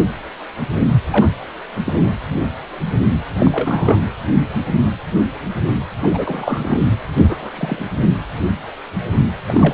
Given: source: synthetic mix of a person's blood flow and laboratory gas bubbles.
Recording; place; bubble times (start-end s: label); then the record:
Doppler ultrasound of blood flow; precordium
1.10-1.30 s: bubbles
1.85-2.17 s: bubbles
3.39-4.01 s: bubbles
6.02-6.85 s: bubbles
7.18-7.50 s: bubbles
7.53-7.86 s: bubbles
9.46-9.74 s: bubbles
From the record:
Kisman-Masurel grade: 232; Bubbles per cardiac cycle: several, 3 to 8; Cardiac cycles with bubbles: 50 to 99%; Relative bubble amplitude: moderate (0.250 to 0.450); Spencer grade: 3 (all of the cardiac periods contain showers or single bubble signals, but not dominating or overriding the cardiac motion signals); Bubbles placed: anywhere in the cardiac cycle